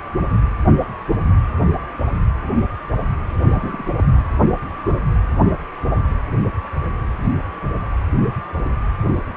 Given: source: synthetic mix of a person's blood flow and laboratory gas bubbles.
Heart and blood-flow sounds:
Doppler ultrasound of blood flow; precordium
3.38-3.94 s: bubbles
3.98-4.05 s: bubbles
From the record:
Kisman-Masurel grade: 211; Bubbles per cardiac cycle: several, 3 to 8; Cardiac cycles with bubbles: 1 to 10%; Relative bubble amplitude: barely perceptible (0.100 to 0.250); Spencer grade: 1 (occasional bubble signal discernible with the cardiac motion signal, with majority of cardiac periods free of bubbles); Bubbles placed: anywhere in the cardiac cycle

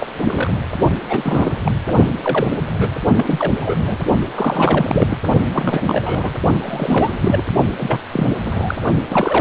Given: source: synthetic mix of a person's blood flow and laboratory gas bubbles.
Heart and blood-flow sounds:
Doppler ultrasound of blood flow; precordium
0.00-0.07 s: bubbles
0.24-0.60 s: bubbles
1.08-1.59 s: bubbles
1.65-1.72 s: bubbles
1.87-1.95 s: bubbles
2.23-2.48 s: bubbles
2.68-2.92 s: bubbles
3.16-3.96 s: bubbles
4.34-5.17 s: bubbles
5.53-6.30 s: bubbles
6.62-7.18 s: bubbles
7.21-7.43 s: bubbles
7.79-7.99 s: bubbles
8.12-8.34 s: bubbles
8.46-8.76 s: bubbles
9.10-9.41 s: bubbles
From the record:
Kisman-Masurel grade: 342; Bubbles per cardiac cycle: rolling drumbeat, 9 or more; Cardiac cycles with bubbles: 100%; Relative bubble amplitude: moderate (0.250 to 0.450); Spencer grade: 3 (all of the cardiac periods contain showers or single bubble signals, but not dominating or overriding the cardiac motion signals); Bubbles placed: only in the low amplitude regions of the cardiac cycle

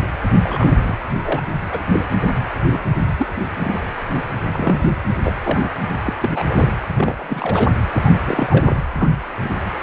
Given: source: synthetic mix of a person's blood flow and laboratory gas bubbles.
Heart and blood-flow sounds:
Doppler ultrasound of blood flow; precordium
0.00-0.02 s: bubbles
0.41-0.79 s: bubbles
0.81-0.95 s: bubbles
1.22-1.40 s: bubbles
1.71-1.83 s: bubbles
1.91-2.04 s: bubbles
2.71-2.80 s: bubbles
2.98-3.13 s: bubbles
3.19-3.27 s: bubbles
3.56-3.86 s: bubbles
4.53-4.86 s: bubbles
5.23-5.34 s: bubbles
5.46-5.69 s: bubbles
6.05-6.13 s: bubbles
6.22-6.73 s: bubbles
6.96-7.71 s: bubbles
7.91-8.19 s: bubbles
8.26-8.77 s: bubbles
8.99-9.10 s: bubbles
9.43-9.50 s: bubbles
From the record:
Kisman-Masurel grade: 242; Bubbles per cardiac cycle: several, 3 to 8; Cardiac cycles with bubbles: 100%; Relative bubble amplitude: moderate (0.250 to 0.450); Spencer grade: 3 (all of the cardiac periods contain showers or single bubble signals, but not dominating or overriding the cardiac motion signals); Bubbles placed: anywhere in the cardiac cycle

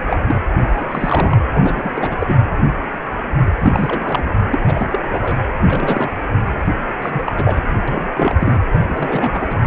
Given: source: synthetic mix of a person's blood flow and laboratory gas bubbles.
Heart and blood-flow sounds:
Doppler ultrasound of blood flow; precordium
0.06-0.17 s: bubbles
0.26-0.35 s: bubbles
0.75-1.42 s: bubbles
1.52-1.92 s: bubbles
1.94-2.35 s: bubbles
3.60-4.23 s: bubbles
4.50-4.59 s: bubbles
4.66-5.00 s: bubbles
5.12-5.38 s: bubbles
5.60-6.10 s: bubbles
6.72-6.77 s: bubbles
7.02-7.62 s: bubbles
7.68-7.79 s: bubbles
7.88-8.08 s: bubbles
8.15-8.62 s: bubbles
8.73-9.57 s: bubbles
From the record:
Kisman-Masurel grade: 332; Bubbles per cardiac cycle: rolling drumbeat, 9 or more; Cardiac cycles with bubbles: 50 to 99%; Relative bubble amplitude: moderate (0.250 to 0.450); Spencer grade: 3 (all of the cardiac periods contain showers or single bubble signals, but not dominating or overriding the cardiac motion signals); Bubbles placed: anywhere in the cardiac cycle

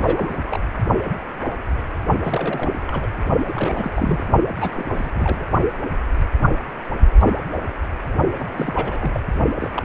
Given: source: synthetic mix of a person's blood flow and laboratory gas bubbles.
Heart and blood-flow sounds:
Doppler ultrasound of blood flow; precordium
0.00-0.43 s: bubbles
0.47-0.57 s: bubbles
2.23-2.71 s: bubbles
2.73-2.79 s: bubbles
2.87-3.08 s: bubbles
3.47-4.25 s: bubbles
4.55-4.71 s: bubbles
4.75-4.85 s: bubbles
4.93-5.10 s: bubbles
5.13-5.47 s: bubbles
8.38-8.46 s: bubbles
8.52-9.21 s: bubbles
9.59-9.70 s: bubbles
9.74-9.82 s: bubbles
From the record:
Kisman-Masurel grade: 332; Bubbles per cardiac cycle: rolling drumbeat, 9 or more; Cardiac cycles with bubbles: 50 to 99%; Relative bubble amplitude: moderate (0.250 to 0.450); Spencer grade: 3 (all of the cardiac periods contain showers or single bubble signals, but not dominating or overriding the cardiac motion signals); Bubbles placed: only in the low amplitude regions of the cardiac cycle

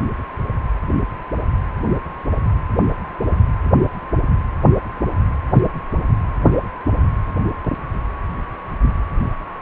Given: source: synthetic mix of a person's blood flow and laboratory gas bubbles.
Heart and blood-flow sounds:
Doppler ultrasound of blood flow; precordium
no bubbles
From the record:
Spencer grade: 0 (complete lack of bubble signals)

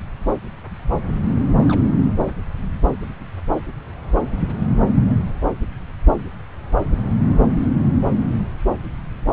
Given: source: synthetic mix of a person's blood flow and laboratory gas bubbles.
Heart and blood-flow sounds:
Doppler ultrasound of blood flow; subclavian vein
1.56-1.94 s: bubbles
From the record:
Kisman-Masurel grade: 211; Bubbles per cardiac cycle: several, 3 to 8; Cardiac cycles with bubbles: 1 to 10%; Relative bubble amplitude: barely perceptible (0.100 to 0.250); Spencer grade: 1 (occasional bubble signal discernible with the cardiac motion signal, with majority of cardiac periods free of bubbles); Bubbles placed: anywhere in the cardiac cycle

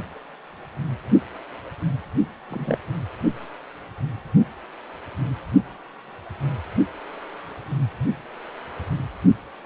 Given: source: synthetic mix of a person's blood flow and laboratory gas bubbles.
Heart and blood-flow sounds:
Doppler ultrasound of blood flow; precordium
2.50-2.78 s: bubbles
From the record:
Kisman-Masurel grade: 112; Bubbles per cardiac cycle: 1 to 2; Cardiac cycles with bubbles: 1 to 10%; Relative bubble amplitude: moderate (0.250 to 0.450); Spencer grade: 1 (occasional bubble signal discernible with the cardiac motion signal, with majority of cardiac periods free of bubbles); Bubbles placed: only in the low amplitude regions of the cardiac cycle

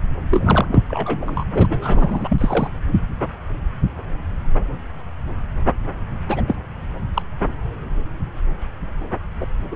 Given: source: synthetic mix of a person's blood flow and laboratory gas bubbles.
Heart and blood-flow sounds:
Doppler ultrasound of blood flow; subclavian vein
0.30-0.82 s: bubbles
0.88-1.44 s: bubbles
1.55-2.70 s: bubbles
6.28-6.42 s: bubbles
6.47-6.56 s: bubbles
7.13-7.22 s: bubbles
9.41-9.46 s: bubbles
9.71-9.75 s: bubbles
From the record:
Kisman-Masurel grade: 232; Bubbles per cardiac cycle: several, 3 to 8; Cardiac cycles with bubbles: 50 to 99%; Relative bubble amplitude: moderate (0.250 to 0.450); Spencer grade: 3 (all of the cardiac periods contain showers or single bubble signals, but not dominating or overriding the cardiac motion signals); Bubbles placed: anywhere in the cardiac cycle

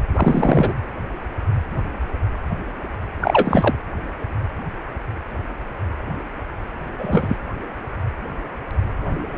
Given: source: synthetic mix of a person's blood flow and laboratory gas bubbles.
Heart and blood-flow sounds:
Doppler ultrasound of blood flow; precordium
0.15-0.74 s: bubbles
3.21-3.76 s: bubbles
6.98-7.36 s: bubbles
From the record:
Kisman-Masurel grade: 223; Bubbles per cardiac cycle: several, 3 to 8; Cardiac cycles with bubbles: 10 to 50%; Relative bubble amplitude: loud (0.450 to 0.775); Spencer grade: 2 (many but less than half of the cardiac periods contain bubble signals, singularly or in groups); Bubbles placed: anywhere in the cardiac cycle

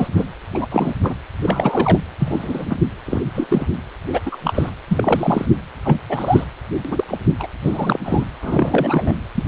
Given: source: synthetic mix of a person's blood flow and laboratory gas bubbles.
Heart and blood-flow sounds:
Doppler ultrasound of blood flow; precordium
0.00-0.07 s: bubbles
0.17-0.25 s: bubbles
0.54-0.67 s: bubbles
0.71-0.94 s: bubbles
1.03-1.15 s: bubbles
1.41-1.98 s: bubbles
2.19-2.66 s: bubbles
2.69-2.76 s: bubbles
3.06-3.21 s: bubbles
3.34-3.46 s: bubbles
3.49-3.67 s: bubbles
4.13-4.21 s: bubbles
4.25-4.38 s: bubbles
4.43-4.70 s: bubbles
4.88-5.46 s: bubbles
5.84-5.97 s: bubbles
6.08-6.44 s: bubbles
6.91-7.04 s: bubbles
7.08-7.17 s: bubbles
7.39-7.46 s: bubbles
7.63-7.99 s: bubbles
8.04-8.24 s: bubbles
8.42-9.14 s: bubbles
9.34-9.43 s: bubbles
From the record:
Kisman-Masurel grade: 243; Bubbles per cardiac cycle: several, 3 to 8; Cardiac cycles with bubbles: 100%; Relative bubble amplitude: loud (0.450 to 0.775); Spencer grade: 3 (all of the cardiac periods contain showers or single bubble signals, but not dominating or overriding the cardiac motion signals); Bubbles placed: anywhere in the cardiac cycle

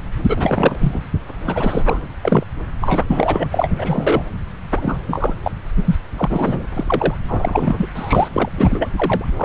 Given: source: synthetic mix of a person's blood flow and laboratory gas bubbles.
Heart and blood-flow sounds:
Doppler ultrasound of blood flow; subclavian vein
0.28-1.08 s: bubbles
1.44-2.01 s: bubbles
2.23-2.44 s: bubbles
2.80-3.48 s: bubbles
3.50-3.71 s: bubbles
3.77-4.23 s: bubbles
4.75-4.98 s: bubbles
5.08-5.35 s: bubbles
5.43-5.52 s: bubbles
5.77-5.95 s: bubbles
6.17-6.66 s: bubbles
6.74-7.15 s: bubbles
7.28-7.87 s: bubbles
7.95-8.29 s: bubbles
8.33-8.49 s: bubbles
8.56-9.25 s: bubbles
9.36-9.45 s: bubbles
From the record:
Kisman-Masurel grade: 333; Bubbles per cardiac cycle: rolling drumbeat, 9 or more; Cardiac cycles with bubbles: 50 to 99%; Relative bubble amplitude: loud (0.450 to 0.775); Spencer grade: 3 (all of the cardiac periods contain showers or single bubble signals, but not dominating or overriding the cardiac motion signals); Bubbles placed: anywhere in the cardiac cycle

